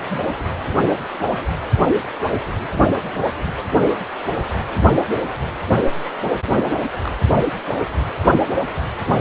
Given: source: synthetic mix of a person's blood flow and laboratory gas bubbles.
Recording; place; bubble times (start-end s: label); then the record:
Doppler ultrasound of blood flow; precordium
0.09-0.21 s: bubbles
6.45-6.83 s: bubbles
7.04-7.17 s: bubbles
From the record:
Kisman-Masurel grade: 121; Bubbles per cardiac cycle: 1 to 2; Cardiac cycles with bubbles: 10 to 50%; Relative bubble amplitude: barely perceptible (0.100 to 0.250); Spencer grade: 2 (many but less than half of the cardiac periods contain bubble signals, singularly or in groups); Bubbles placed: only in the low amplitude regions of the cardiac cycle